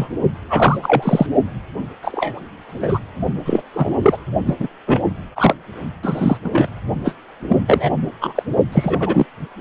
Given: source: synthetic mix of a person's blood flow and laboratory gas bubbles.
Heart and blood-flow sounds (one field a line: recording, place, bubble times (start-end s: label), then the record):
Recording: Doppler ultrasound of blood flow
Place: precordium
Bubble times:
0.00-0.07 s: bubbles
0.49-0.78 s: bubbles
0.82-1.27 s: bubbles
2.02-2.40 s: bubbles
2.68-2.99 s: bubbles
3.45-3.62 s: bubbles
3.74-4.17 s: bubbles
4.46-4.56 s: bubbles
4.59-4.67 s: bubbles
4.86-5.01 s: bubbles
5.35-5.54 s: bubbles
6.02-6.38 s: bubbles
6.44-6.50 s: bubbles
6.53-6.69 s: bubbles
7.05-7.15 s: bubbles
7.48-7.57 s: bubbles
7.67-7.90 s: bubbles
8.21-8.43 s: bubbles
8.72-9.26 s: bubbles
From the record:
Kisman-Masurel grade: 233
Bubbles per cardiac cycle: several, 3 to 8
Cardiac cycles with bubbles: 50 to 99%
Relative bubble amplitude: loud (0.450 to 0.775)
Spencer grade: 3 (all of the cardiac periods contain showers or single bubble signals, but not dominating or overriding the cardiac motion signals)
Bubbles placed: only in the low amplitude regions of the cardiac cycle